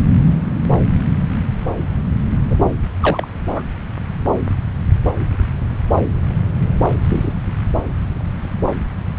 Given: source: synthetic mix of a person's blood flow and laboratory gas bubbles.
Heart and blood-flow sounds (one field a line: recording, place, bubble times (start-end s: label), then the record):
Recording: Doppler ultrasound of blood flow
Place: subclavian vein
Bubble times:
2.50-2.56 s: bubbles
3.00-3.27 s: bubbles
3.47-3.62 s: bubbles
7.01-7.33 s: bubbles
From the record:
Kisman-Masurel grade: 122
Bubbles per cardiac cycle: 1 to 2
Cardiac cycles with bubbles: 10 to 50%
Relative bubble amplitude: moderate (0.250 to 0.450)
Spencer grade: 2 (many but less than half of the cardiac periods contain bubble signals, singularly or in groups)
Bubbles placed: anywhere in the cardiac cycle